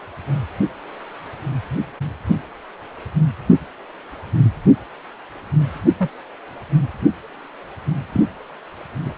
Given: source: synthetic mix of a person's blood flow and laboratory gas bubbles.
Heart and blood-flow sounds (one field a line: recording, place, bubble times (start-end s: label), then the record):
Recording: Doppler ultrasound of blood flow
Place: precordium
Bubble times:
5.97-6.09 s: bubbles
8.12-8.26 s: bubbles
9.05-9.13 s: bubbles
From the record:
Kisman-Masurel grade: 122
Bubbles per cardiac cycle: 1 to 2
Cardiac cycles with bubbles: 10 to 50%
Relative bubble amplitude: moderate (0.250 to 0.450)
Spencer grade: 2 (many but less than half of the cardiac periods contain bubble signals, singularly or in groups)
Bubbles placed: anywhere in the cardiac cycle